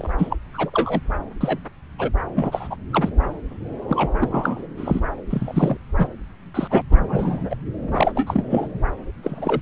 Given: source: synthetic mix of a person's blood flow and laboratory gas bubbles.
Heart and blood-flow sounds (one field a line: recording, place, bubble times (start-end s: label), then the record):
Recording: Doppler ultrasound of blood flow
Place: subclavian vein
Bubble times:
0.00-0.12 s: bubbles
0.18-0.37 s: bubbles
0.54-0.70 s: bubbles
0.73-1.00 s: bubbles
1.41-1.58 s: bubbles
1.99-2.11 s: bubbles
2.35-2.76 s: bubbles
2.93-3.09 s: bubbles
3.88-4.10 s: bubbles
4.20-4.67 s: bubbles
4.77-5.00 s: bubbles
5.30-5.77 s: bubbles
5.98-6.08 s: bubbles
6.54-6.67 s: bubbles
6.70-6.82 s: bubbles
6.89-7.56 s: bubbles
7.91-8.12 s: bubbles
8.15-8.46 s: bubbles
8.50-8.69 s: bubbles
9.23-9.61 s: bubbles
From the record:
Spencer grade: 3 (all of the cardiac periods contain showers or single bubble signals, but not dominating or overriding the cardiac motion signals)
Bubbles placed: anywhere in the cardiac cycle